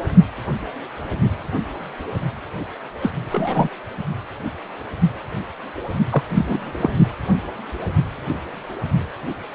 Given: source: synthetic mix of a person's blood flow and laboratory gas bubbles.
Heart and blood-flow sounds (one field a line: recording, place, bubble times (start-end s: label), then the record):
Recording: Doppler ultrasound of blood flow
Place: precordium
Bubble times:
3.01-3.13 s: bubbles
3.31-3.69 s: bubbles
6.10-6.23 s: bubbles
6.34-6.90 s: bubbles
From the record:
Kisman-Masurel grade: 222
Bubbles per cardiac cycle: several, 3 to 8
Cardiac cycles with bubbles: 10 to 50%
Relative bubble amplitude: moderate (0.250 to 0.450)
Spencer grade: 2 (many but less than half of the cardiac periods contain bubble signals, singularly or in groups)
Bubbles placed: only in the low amplitude regions of the cardiac cycle